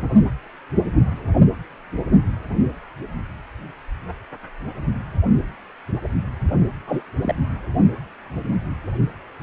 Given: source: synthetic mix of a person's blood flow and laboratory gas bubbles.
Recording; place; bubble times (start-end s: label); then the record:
Doppler ultrasound of blood flow; precordium
6.87-7.01 s: bubbles
7.22-7.34 s: bubbles
From the record:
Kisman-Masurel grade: 112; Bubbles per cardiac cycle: 1 to 2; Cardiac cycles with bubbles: 1 to 10%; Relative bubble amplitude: moderate (0.250 to 0.450); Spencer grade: 1 (occasional bubble signal discernible with the cardiac motion signal, with majority of cardiac periods free of bubbles); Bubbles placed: only in the low amplitude regions of the cardiac cycle